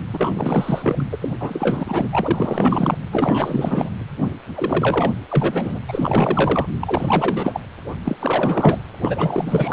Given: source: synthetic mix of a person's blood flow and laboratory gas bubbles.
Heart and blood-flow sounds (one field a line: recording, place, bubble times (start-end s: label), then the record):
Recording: Doppler ultrasound of blood flow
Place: precordium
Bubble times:
0.12-1.06 s: bubbles
1.12-1.18 s: bubbles
1.21-1.28 s: bubbles
1.40-2.98 s: bubbles
3.11-3.90 s: bubbles
4.54-5.12 s: bubbles
5.28-5.79 s: bubbles
5.88-6.66 s: bubbles
6.80-7.60 s: bubbles
8.04-8.16 s: bubbles
8.20-8.79 s: bubbles
9.02-9.73 s: bubbles
From the record:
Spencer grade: 4 (maximum detectable bubble signal sounding continuously throughout systole and diastole of every cardiac period, and overriding the amplitude of the normal cardiac signals)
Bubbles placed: anywhere in the cardiac cycle